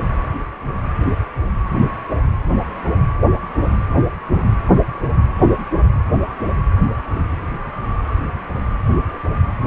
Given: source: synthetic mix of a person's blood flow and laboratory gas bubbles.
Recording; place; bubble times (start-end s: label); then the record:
Doppler ultrasound of blood flow; precordium
no bubbles
From the record:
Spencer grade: 0 (complete lack of bubble signals)